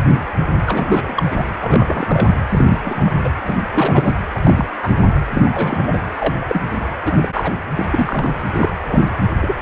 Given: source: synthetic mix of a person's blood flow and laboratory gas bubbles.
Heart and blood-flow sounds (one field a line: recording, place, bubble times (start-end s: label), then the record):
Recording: Doppler ultrasound of blood flow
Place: precordium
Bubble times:
0.08-0.22 s: bubbles
0.56-0.64 s: bubbles
0.67-1.44 s: bubbles
1.61-2.37 s: bubbles
2.48-2.65 s: bubbles
2.69-2.78 s: bubbles
2.83-3.14 s: bubbles
3.23-3.29 s: bubbles
3.46-3.56 s: bubbles
3.73-4.17 s: bubbles
4.34-4.38 s: bubbles
4.43-4.65 s: bubbles
4.82-4.91 s: bubbles
5.33-6.00 s: bubbles
6.20-6.34 s: bubbles
6.47-6.61 s: bubbles
7.05-7.29 s: bubbles
7.33-7.54 s: bubbles
7.75-7.85 s: bubbles
7.90-8.41 s: bubbles
8.54-8.72 s: bubbles
8.87-9.11 s: bubbles
9.41-9.55 s: bubbles
From the record:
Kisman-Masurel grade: 242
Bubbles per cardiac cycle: several, 3 to 8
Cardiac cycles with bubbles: 100%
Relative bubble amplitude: moderate (0.250 to 0.450)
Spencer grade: 3 (all of the cardiac periods contain showers or single bubble signals, but not dominating or overriding the cardiac motion signals)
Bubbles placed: anywhere in the cardiac cycle